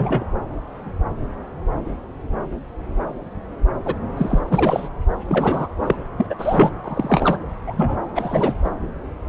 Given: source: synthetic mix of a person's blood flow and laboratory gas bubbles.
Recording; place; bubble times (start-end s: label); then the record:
Doppler ultrasound of blood flow; subclavian vein
0.00-0.25 s: bubbles
3.85-3.95 s: bubbles
4.17-4.41 s: bubbles
4.50-4.89 s: bubbles
5.28-5.67 s: bubbles
5.82-5.95 s: bubbles
6.17-6.26 s: bubbles
6.29-6.35 s: bubbles
6.38-6.70 s: bubbles
6.84-7.38 s: bubbles
7.67-7.75 s: bubbles
7.77-7.97 s: bubbles
8.15-8.54 s: bubbles
8.64-8.70 s: bubbles
From the record:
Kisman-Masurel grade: 232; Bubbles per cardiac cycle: several, 3 to 8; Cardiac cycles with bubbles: 50 to 99%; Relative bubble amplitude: moderate (0.250 to 0.450); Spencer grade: 3 (all of the cardiac periods contain showers or single bubble signals, but not dominating or overriding the cardiac motion signals); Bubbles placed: anywhere in the cardiac cycle